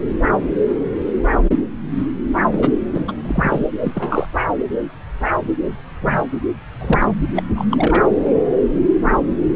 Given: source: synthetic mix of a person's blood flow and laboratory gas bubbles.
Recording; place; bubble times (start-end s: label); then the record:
Doppler ultrasound of blood flow; subclavian vein
2.51-2.71 s: bubbles
2.94-3.12 s: bubbles
3.25-3.67 s: bubbles
3.81-3.92 s: bubbles
3.94-4.29 s: bubbles
6.02-6.21 s: bubbles
6.81-7.08 s: bubbles
7.36-7.42 s: bubbles
7.55-7.65 s: bubbles
7.71-8.04 s: bubbles
From the record:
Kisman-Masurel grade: 222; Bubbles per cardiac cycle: several, 3 to 8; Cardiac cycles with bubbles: 10 to 50%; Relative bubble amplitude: moderate (0.250 to 0.450); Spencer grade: 2 (many but less than half of the cardiac periods contain bubble signals, singularly or in groups); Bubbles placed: anywhere in the cardiac cycle